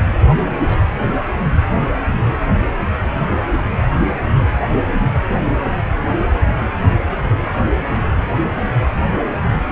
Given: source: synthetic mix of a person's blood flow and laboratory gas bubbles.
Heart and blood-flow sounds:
Doppler ultrasound of blood flow; precordium
0.24-0.29 s: bubbles
0.44-0.85 s: bubbles
7.33-7.50 s: bubbles
7.70-7.83 s: bubbles
7.90-8.02 s: bubbles
8.19-8.29 s: bubbles
From the record:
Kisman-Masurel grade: 221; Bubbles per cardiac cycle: several, 3 to 8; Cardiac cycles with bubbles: 10 to 50%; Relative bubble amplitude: barely perceptible (0.100 to 0.250); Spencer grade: 2 (many but less than half of the cardiac periods contain bubble signals, singularly or in groups); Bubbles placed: anywhere in the cardiac cycle

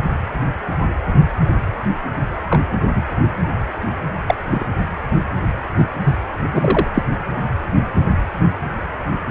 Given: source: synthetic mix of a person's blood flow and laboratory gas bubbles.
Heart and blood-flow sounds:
Doppler ultrasound of blood flow; precordium
2.48-2.61 s: bubbles
2.94-3.03 s: bubbles
4.27-4.35 s: bubbles
4.50-4.66 s: bubbles
5.75-5.86 s: bubbles
6.03-6.14 s: bubbles
6.52-6.88 s: bubbles
6.94-7.02 s: bubbles
From the record:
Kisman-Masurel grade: 123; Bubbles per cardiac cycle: 1 to 2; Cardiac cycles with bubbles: 10 to 50%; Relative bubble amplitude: loud (0.450 to 0.775); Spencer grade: 2 (many but less than half of the cardiac periods contain bubble signals, singularly or in groups); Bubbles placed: anywhere in the cardiac cycle

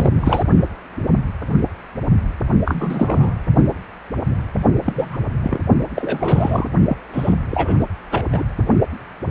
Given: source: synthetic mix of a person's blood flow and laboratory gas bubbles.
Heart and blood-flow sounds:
Doppler ultrasound of blood flow; precordium
0.00-0.10 s: bubbles
0.20-0.44 s: bubbles
2.65-3.34 s: bubbles
4.84-5.17 s: bubbles
5.43-5.58 s: bubbles
5.96-6.67 s: bubbles
6.88-6.96 s: bubbles
7.12-7.34 s: bubbles
7.51-7.75 s: bubbles
7.80-7.85 s: bubbles
8.11-8.24 s: bubbles
8.32-8.44 s: bubbles
From the record:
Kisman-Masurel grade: 233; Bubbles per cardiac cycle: several, 3 to 8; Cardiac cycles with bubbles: 50 to 99%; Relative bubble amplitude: loud (0.450 to 0.775); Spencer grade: 3 (all of the cardiac periods contain showers or single bubble signals, but not dominating or overriding the cardiac motion signals); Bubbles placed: only in the low amplitude regions of the cardiac cycle

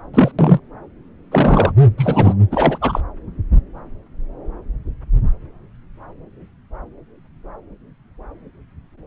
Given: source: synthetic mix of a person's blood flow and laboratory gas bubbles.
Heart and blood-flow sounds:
Doppler ultrasound of blood flow; subclavian vein
0.13-0.32 s: bubbles
0.38-0.59 s: bubbles
1.31-1.72 s: bubbles
1.98-2.34 s: bubbles
2.51-2.78 s: bubbles
2.81-3.00 s: bubbles
From the record:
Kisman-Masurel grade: 223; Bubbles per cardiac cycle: several, 3 to 8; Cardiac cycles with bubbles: 10 to 50%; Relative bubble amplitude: loud (0.450 to 0.775); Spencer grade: 2 (many but less than half of the cardiac periods contain bubble signals, singularly or in groups); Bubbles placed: anywhere in the cardiac cycle

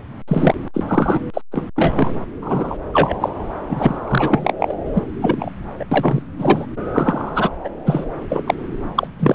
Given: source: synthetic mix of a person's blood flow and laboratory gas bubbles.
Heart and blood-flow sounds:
Doppler ultrasound of blood flow; subclavian vein
0.28-0.55 s: bubbles
0.73-0.84 s: bubbles
0.88-1.21 s: bubbles
1.33-1.42 s: bubbles
1.52-1.65 s: bubbles
1.76-2.13 s: bubbles
2.42-2.77 s: bubbles
2.92-3.29 s: bubbles
3.69-3.98 s: bubbles
4.07-4.53 s: bubbles
4.59-4.76 s: bubbles
4.93-5.02 s: bubbles
5.21-5.50 s: bubbles
5.79-5.84 s: bubbles
5.91-6.22 s: bubbles
6.38-6.65 s: bubbles
6.93-7.50 s: bubbles
7.64-7.69 s: bubbles
7.86-8.05 s: bubbles
8.29-8.43 s: bubbles
8.46-8.54 s: bubbles
8.95-9.07 s: bubbles
9.19-9.34 s: bubbles
From the record:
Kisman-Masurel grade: 233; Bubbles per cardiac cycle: several, 3 to 8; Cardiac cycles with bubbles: 50 to 99%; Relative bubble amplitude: loud (0.450 to 0.775); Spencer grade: 3 (all of the cardiac periods contain showers or single bubble signals, but not dominating or overriding the cardiac motion signals); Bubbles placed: anywhere in the cardiac cycle

